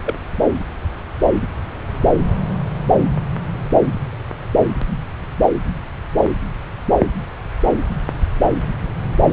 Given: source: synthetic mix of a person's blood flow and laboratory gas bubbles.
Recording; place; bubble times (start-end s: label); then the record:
Doppler ultrasound of blood flow; subclavian vein
0.04-0.17 s: bubbles
From the record:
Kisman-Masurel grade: 112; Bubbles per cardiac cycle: 1 to 2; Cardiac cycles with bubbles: 1 to 10%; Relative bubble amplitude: moderate (0.250 to 0.450); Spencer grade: 1 (occasional bubble signal discernible with the cardiac motion signal, with majority of cardiac periods free of bubbles); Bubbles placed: anywhere in the cardiac cycle